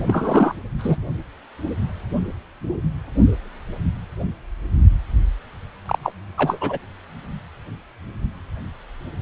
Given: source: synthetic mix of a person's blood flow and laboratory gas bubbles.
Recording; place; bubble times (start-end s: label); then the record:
Doppler ultrasound of blood flow; precordium
0.00-0.03 s: bubbles
0.07-0.54 s: bubbles
0.78-0.97 s: bubbles
5.86-5.99 s: bubbles
6.03-6.12 s: bubbles
6.37-6.78 s: bubbles
From the record:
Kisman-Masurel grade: 223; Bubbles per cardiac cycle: several, 3 to 8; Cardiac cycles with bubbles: 10 to 50%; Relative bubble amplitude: loud (0.450 to 0.775); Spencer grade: 2 (many but less than half of the cardiac periods contain bubble signals, singularly or in groups); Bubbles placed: anywhere in the cardiac cycle